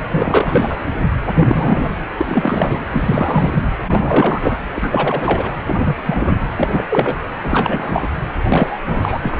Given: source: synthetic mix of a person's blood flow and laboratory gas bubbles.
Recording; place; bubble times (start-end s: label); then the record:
Doppler ultrasound of blood flow; precordium
0.10-0.77 s: bubbles
1.35-1.90 s: bubbles
2.17-2.80 s: bubbles
2.91-3.64 s: bubbles
3.87-4.58 s: bubbles
4.75-5.52 s: bubbles
5.62-6.00 s: bubbles
6.05-6.40 s: bubbles
6.56-6.86 s: bubbles
6.90-7.16 s: bubbles
7.43-8.08 s: bubbles
8.48-8.80 s: bubbles
8.87-9.40 s: bubbles
From the record:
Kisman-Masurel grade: 343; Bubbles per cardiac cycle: rolling drumbeat, 9 or more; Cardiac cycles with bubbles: 100%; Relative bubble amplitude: loud (0.450 to 0.775); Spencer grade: 3 (all of the cardiac periods contain showers or single bubble signals, but not dominating or overriding the cardiac motion signals); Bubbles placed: anywhere in the cardiac cycle